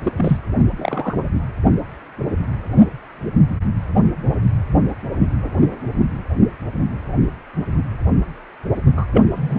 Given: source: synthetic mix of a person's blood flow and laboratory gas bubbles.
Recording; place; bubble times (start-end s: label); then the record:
Doppler ultrasound of blood flow; precordium
0.04-0.12 s: bubbles
0.16-0.38 s: bubbles
0.71-1.17 s: bubbles
8.96-9.05 s: bubbles
9.13-9.59 s: bubbles
From the record:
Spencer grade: 2 (many but less than half of the cardiac periods contain bubble signals, singularly or in groups); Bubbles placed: only in the low amplitude regions of the cardiac cycle